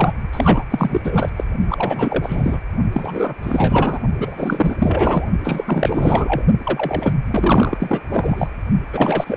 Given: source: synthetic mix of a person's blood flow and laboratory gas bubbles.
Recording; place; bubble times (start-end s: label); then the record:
Doppler ultrasound of blood flow; precordium
0.00-0.13 s: bubbles
0.32-0.64 s: bubbles
0.70-1.01 s: bubbles
1.03-1.30 s: bubbles
1.36-1.44 s: bubbles
1.69-2.59 s: bubbles
2.92-3.35 s: bubbles
3.42-3.99 s: bubbles
4.19-5.27 s: bubbles
5.44-6.44 s: bubbles
6.65-7.14 s: bubbles
7.27-8.01 s: bubbles
8.10-8.47 s: bubbles
8.92-9.37 s: bubbles
From the record:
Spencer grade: 4 (maximum detectable bubble signal sounding continuously throughout systole and diastole of every cardiac period, and overriding the amplitude of the normal cardiac signals); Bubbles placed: only in the low amplitude regions of the cardiac cycle